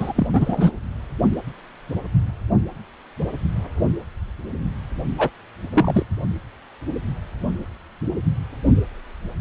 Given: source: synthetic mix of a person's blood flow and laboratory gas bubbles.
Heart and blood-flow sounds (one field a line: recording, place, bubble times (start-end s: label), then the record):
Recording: Doppler ultrasound of blood flow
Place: precordium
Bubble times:
0.00-0.12 s: bubbles
0.15-0.27 s: bubbles
0.32-0.72 s: bubbles
5.18-5.29 s: bubbles
5.73-6.06 s: bubbles
From the record:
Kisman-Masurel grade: 223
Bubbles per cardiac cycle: several, 3 to 8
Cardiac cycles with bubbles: 10 to 50%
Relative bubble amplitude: loud (0.450 to 0.775)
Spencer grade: 2 (many but less than half of the cardiac periods contain bubble signals, singularly or in groups)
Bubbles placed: only in the low amplitude regions of the cardiac cycle